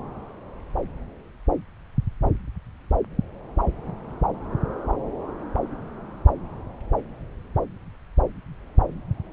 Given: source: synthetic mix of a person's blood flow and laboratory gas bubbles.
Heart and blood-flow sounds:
Doppler ultrasound of blood flow; subclavian vein
no bubbles
From the record:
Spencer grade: 0 (complete lack of bubble signals)

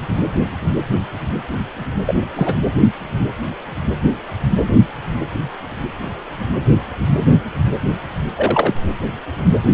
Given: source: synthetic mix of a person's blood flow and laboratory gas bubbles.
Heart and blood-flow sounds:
Doppler ultrasound of blood flow; precordium
2.06-2.14 s: bubbles
2.35-2.56 s: bubbles
8.36-8.75 s: bubbles
From the record:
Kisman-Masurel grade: 223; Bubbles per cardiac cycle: several, 3 to 8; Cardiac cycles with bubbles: 10 to 50%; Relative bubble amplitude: loud (0.450 to 0.775); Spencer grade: 2 (many but less than half of the cardiac periods contain bubble signals, singularly or in groups); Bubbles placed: anywhere in the cardiac cycle

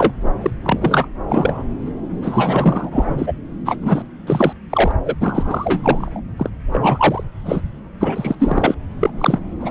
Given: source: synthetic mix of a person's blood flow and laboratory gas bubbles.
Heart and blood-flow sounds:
Doppler ultrasound of blood flow; subclavian vein
0.00-0.12 s: bubbles
0.40-0.50 s: bubbles
0.63-1.08 s: bubbles
1.29-1.64 s: bubbles
2.22-3.33 s: bubbles
3.66-3.75 s: bubbles
3.82-4.02 s: bubbles
4.26-4.53 s: bubbles
4.70-4.92 s: bubbles
5.05-5.15 s: bubbles
5.20-6.20 s: bubbles
6.37-6.50 s: bubbles
6.72-7.24 s: bubbles
7.45-7.61 s: bubbles
8.01-8.35 s: bubbles
8.39-8.74 s: bubbles
9.01-9.10 s: bubbles
9.18-9.39 s: bubbles
9.60-9.71 s: bubbles
From the record:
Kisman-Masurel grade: 343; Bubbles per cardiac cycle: rolling drumbeat, 9 or more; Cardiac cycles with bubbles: 100%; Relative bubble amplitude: loud (0.450 to 0.775); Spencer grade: 3 (all of the cardiac periods contain showers or single bubble signals, but not dominating or overriding the cardiac motion signals); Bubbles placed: anywhere in the cardiac cycle

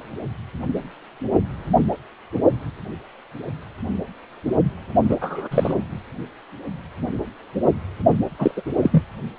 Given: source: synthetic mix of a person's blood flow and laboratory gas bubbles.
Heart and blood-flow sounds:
Doppler ultrasound of blood flow; precordium
5.09-5.16 s: bubbles
5.21-5.48 s: bubbles
5.50-5.74 s: bubbles
8.38-8.51 s: bubbles
8.56-8.62 s: bubbles
8.81-9.03 s: bubbles
From the record:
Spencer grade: 2 (many but less than half of the cardiac periods contain bubble signals, singularly or in groups); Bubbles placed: only in the low amplitude regions of the cardiac cycle

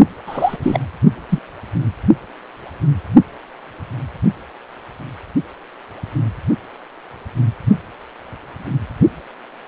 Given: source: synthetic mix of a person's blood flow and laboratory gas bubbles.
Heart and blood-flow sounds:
Doppler ultrasound of blood flow; precordium
0.27-0.57 s: bubbles
0.62-0.79 s: bubbles
1.29-1.39 s: bubbles
From the record:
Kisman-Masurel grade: 213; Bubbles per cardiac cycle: several, 3 to 8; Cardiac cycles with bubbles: 1 to 10%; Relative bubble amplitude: loud (0.450 to 0.775); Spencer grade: 1 (occasional bubble signal discernible with the cardiac motion signal, with majority of cardiac periods free of bubbles); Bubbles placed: only in the low amplitude regions of the cardiac cycle

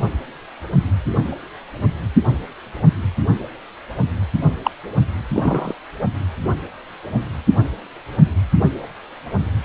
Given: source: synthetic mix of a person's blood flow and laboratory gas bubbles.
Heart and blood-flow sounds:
Doppler ultrasound of blood flow; precordium
4.64-4.71 s: bubbles
5.33-5.74 s: bubbles
From the record:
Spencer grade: 1 (occasional bubble signal discernible with the cardiac motion signal, with majority of cardiac periods free of bubbles); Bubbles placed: only in the low amplitude regions of the cardiac cycle

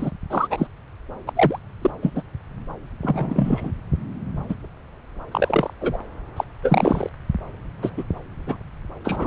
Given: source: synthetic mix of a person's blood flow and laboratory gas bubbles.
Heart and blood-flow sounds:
Doppler ultrasound of blood flow; subclavian vein
0.00-0.10 s: bubbles
0.30-0.47 s: bubbles
0.50-0.67 s: bubbles
1.27-1.32 s: bubbles
1.35-1.58 s: bubbles
1.82-1.90 s: bubbles
2.03-2.22 s: bubbles
3.03-3.72 s: bubbles
4.48-4.55 s: bubbles
5.31-5.73 s: bubbles
5.80-5.97 s: bubbles
6.37-6.44 s: bubbles
6.62-7.09 s: bubbles
7.82-7.90 s: bubbles
7.97-8.04 s: bubbles
8.46-8.56 s: bubbles
9.04-9.27 s: bubbles
From the record:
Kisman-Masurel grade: 232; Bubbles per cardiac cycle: several, 3 to 8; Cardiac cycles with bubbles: 50 to 99%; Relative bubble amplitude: moderate (0.250 to 0.450); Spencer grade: 3 (all of the cardiac periods contain showers or single bubble signals, but not dominating or overriding the cardiac motion signals); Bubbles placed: anywhere in the cardiac cycle

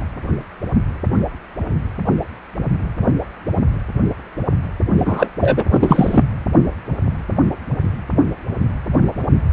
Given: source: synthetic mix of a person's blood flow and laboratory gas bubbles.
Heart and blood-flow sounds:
Doppler ultrasound of blood flow; precordium
4.98-5.28 s: bubbles
5.40-5.64 s: bubbles
5.71-6.24 s: bubbles
From the record:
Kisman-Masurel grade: 223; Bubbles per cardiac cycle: several, 3 to 8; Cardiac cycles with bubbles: 10 to 50%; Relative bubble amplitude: loud (0.450 to 0.775); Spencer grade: 2 (many but less than half of the cardiac periods contain bubble signals, singularly or in groups); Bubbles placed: anywhere in the cardiac cycle

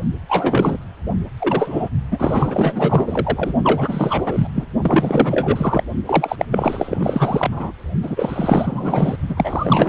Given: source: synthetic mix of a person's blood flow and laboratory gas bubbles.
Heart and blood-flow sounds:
Doppler ultrasound of blood flow; precordium
0.29-0.77 s: bubbles
1.39-1.90 s: bubbles
2.11-3.54 s: bubbles
3.63-4.65 s: bubbles
4.83-5.83 s: bubbles
6.06-6.45 s: bubbles
6.51-7.71 s: bubbles
8.02-9.17 s: bubbles
9.29-9.89 s: bubbles
From the record:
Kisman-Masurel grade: 444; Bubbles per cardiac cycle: continuous sound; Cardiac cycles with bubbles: 100%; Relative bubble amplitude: maximal (0.775 to 0.999); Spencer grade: 4 (maximum detectable bubble signal sounding continuously throughout systole and diastole of every cardiac period, and overriding the amplitude of the normal cardiac signals); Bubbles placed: only in the low amplitude regions of the cardiac cycle

